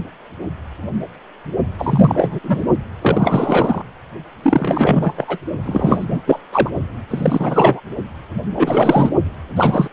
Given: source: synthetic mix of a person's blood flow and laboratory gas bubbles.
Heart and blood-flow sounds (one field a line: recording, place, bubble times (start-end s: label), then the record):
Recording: Doppler ultrasound of blood flow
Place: precordium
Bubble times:
1.78-2.40 s: bubbles
2.43-2.63 s: bubbles
3.01-3.82 s: bubbles
4.42-5.38 s: bubbles
5.65-6.06 s: bubbles
6.10-6.21 s: bubbles
6.25-6.39 s: bubbles
6.52-6.69 s: bubbles
7.09-7.80 s: bubbles
8.56-9.11 s: bubbles
9.56-9.88 s: bubbles
From the record:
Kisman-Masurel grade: 333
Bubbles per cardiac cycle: rolling drumbeat, 9 or more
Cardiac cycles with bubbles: 50 to 99%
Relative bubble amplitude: loud (0.450 to 0.775)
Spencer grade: 3 (all of the cardiac periods contain showers or single bubble signals, but not dominating or overriding the cardiac motion signals)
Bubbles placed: only in the low amplitude regions of the cardiac cycle